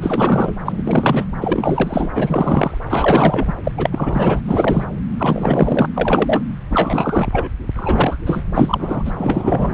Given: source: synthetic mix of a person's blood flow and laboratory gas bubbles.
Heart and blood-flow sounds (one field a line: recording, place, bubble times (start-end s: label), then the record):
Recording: Doppler ultrasound of blood flow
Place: subclavian vein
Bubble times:
0.00-0.55 s: bubbles
0.66-1.25 s: bubbles
1.41-2.09 s: bubbles
2.15-2.78 s: bubbles
2.90-3.53 s: bubbles
3.63-3.71 s: bubbles
3.77-4.41 s: bubbles
4.45-4.85 s: bubbles
5.18-5.86 s: bubbles
5.95-6.42 s: bubbles
6.70-7.28 s: bubbles
7.32-7.48 s: bubbles
7.75-8.18 s: bubbles
8.26-8.43 s: bubbles
8.51-9.12 s: bubbles
9.18-9.74 s: bubbles
From the record:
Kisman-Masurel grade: 343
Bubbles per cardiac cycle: rolling drumbeat, 9 or more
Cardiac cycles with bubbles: 100%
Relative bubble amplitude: loud (0.450 to 0.775)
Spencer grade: 3 (all of the cardiac periods contain showers or single bubble signals, but not dominating or overriding the cardiac motion signals)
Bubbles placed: anywhere in the cardiac cycle